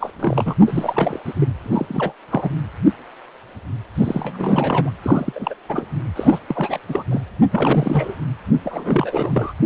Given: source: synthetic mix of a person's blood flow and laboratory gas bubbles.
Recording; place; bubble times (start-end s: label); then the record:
Doppler ultrasound of blood flow; precordium
0.00-0.11 s: bubbles
0.19-0.54 s: bubbles
0.60-1.19 s: bubbles
1.25-1.33 s: bubbles
1.40-1.48 s: bubbles
1.63-2.12 s: bubbles
2.29-2.50 s: bubbles
3.95-4.91 s: bubbles
5.02-5.54 s: bubbles
5.68-5.85 s: bubbles
6.16-6.38 s: bubbles
6.46-6.78 s: bubbles
6.88-7.04 s: bubbles
7.10-7.21 s: bubbles
7.51-8.16 s: bubbles
8.64-9.54 s: bubbles
From the record:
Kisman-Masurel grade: 332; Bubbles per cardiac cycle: rolling drumbeat, 9 or more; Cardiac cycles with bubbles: 50 to 99%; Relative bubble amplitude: moderate (0.250 to 0.450); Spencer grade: 3 (all of the cardiac periods contain showers or single bubble signals, but not dominating or overriding the cardiac motion signals); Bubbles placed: anywhere in the cardiac cycle